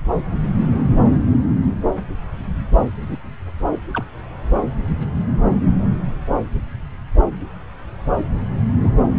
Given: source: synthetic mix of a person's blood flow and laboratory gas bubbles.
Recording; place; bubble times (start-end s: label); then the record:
Doppler ultrasound of blood flow; subclavian vein
3.01-3.18 s: bubbles
3.94-4.04 s: bubbles
8.82-8.90 s: bubbles
From the record:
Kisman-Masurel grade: 121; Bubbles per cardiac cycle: 1 to 2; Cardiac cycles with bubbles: 10 to 50%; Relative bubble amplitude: barely perceptible (0.100 to 0.250); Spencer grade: 2 (many but less than half of the cardiac periods contain bubble signals, singularly or in groups); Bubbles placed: anywhere in the cardiac cycle